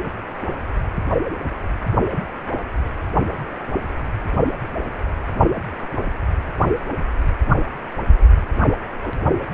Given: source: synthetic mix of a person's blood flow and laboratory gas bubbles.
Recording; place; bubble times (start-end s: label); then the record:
Doppler ultrasound of blood flow; precordium
no bubbles
From the record:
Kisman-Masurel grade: 000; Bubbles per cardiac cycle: 0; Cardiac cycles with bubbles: 0%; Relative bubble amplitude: no bubbles discernible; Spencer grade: 0 (complete lack of bubble signals)